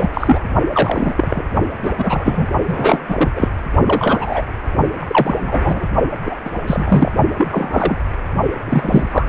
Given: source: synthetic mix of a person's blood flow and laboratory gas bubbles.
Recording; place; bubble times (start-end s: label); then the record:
Doppler ultrasound of blood flow; precordium
0.00-0.10 s: bubbles
0.13-0.40 s: bubbles
0.72-1.14 s: bubbles
1.17-1.43 s: bubbles
1.83-1.92 s: bubbles
1.98-2.48 s: bubbles
2.67-2.99 s: bubbles
3.08-3.15 s: bubbles
3.17-3.29 s: bubbles
3.35-3.48 s: bubbles
3.86-4.42 s: bubbles
5.01-5.85 s: bubbles
6.25-6.36 s: bubbles
6.45-6.50 s: bubbles
6.66-7.10 s: bubbles
7.38-7.48 s: bubbles
7.51-7.96 s: bubbles
8.65-9.29 s: bubbles
From the record:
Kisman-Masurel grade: 243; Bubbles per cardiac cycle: several, 3 to 8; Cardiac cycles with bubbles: 100%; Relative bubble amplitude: loud (0.450 to 0.775); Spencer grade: 3 (all of the cardiac periods contain showers or single bubble signals, but not dominating or overriding the cardiac motion signals); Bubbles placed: only in the low amplitude regions of the cardiac cycle